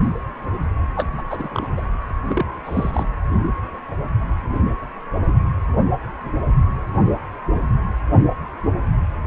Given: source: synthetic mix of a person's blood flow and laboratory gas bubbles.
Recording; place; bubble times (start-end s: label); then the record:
Doppler ultrasound of blood flow; precordium
0.96-1.09 s: bubbles
1.18-1.22 s: bubbles
1.30-1.68 s: bubbles
1.77-1.82 s: bubbles
2.27-2.46 s: bubbles
2.65-3.06 s: bubbles
From the record:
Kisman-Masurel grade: 222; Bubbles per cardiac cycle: several, 3 to 8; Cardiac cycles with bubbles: 10 to 50%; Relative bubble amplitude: moderate (0.250 to 0.450); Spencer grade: 2 (many but less than half of the cardiac periods contain bubble signals, singularly or in groups); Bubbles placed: anywhere in the cardiac cycle